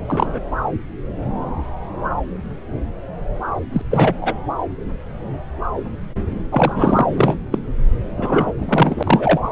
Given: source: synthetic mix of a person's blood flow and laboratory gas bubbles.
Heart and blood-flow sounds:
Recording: Doppler ultrasound of blood flow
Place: subclavian vein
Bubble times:
0.07-0.39 s: bubbles
3.73-3.81 s: bubbles
3.90-4.16 s: bubbles
4.21-4.34 s: bubbles
6.51-7.06 s: bubbles
7.16-7.35 s: bubbles
7.51-7.58 s: bubbles
8.17-8.53 s: bubbles
8.58-9.52 s: bubbles
From the record:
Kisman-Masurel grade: 233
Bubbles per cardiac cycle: several, 3 to 8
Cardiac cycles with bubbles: 50 to 99%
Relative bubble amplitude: loud (0.450 to 0.775)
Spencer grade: 3 (all of the cardiac periods contain showers or single bubble signals, but not dominating or overriding the cardiac motion signals)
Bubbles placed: anywhere in the cardiac cycle

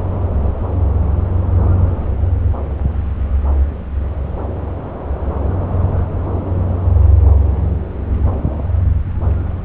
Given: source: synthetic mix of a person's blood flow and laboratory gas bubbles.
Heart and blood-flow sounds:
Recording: Doppler ultrasound of blood flow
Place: subclavian vein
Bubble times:
no bubbles
From the record:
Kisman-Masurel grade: 000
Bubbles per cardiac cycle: 0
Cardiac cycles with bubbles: 0%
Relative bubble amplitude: no bubbles discernible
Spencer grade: 0 (complete lack of bubble signals)

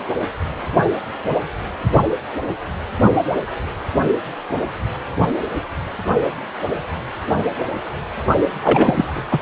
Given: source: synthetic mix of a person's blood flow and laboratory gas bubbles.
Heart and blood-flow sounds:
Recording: Doppler ultrasound of blood flow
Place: precordium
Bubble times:
8.62-9.25 s: bubbles
9.31-9.38 s: bubbles
From the record:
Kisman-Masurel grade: 223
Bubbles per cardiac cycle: several, 3 to 8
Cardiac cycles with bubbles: 10 to 50%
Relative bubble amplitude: loud (0.450 to 0.775)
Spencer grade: 2 (many but less than half of the cardiac periods contain bubble signals, singularly or in groups)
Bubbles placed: only in the low amplitude regions of the cardiac cycle

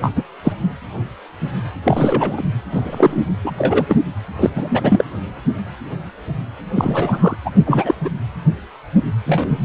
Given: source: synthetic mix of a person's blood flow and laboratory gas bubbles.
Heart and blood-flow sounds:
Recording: Doppler ultrasound of blood flow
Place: precordium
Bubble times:
0.01-0.13 s: bubbles
0.15-0.23 s: bubbles
0.44-0.53 s: bubbles
1.84-2.44 s: bubbles
2.72-3.21 s: bubbles
3.45-3.52 s: bubbles
3.58-3.85 s: bubbles
3.89-3.97 s: bubbles
4.39-4.50 s: bubbles
4.55-5.04 s: bubbles
6.75-7.36 s: bubbles
7.45-7.51 s: bubbles
7.66-7.94 s: bubbles
8.04-8.10 s: bubbles
9.26-9.65 s: bubbles
From the record:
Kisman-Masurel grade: 233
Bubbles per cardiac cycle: several, 3 to 8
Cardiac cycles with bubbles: 50 to 99%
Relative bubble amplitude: loud (0.450 to 0.775)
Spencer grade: 3 (all of the cardiac periods contain showers or single bubble signals, but not dominating or overriding the cardiac motion signals)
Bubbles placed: anywhere in the cardiac cycle

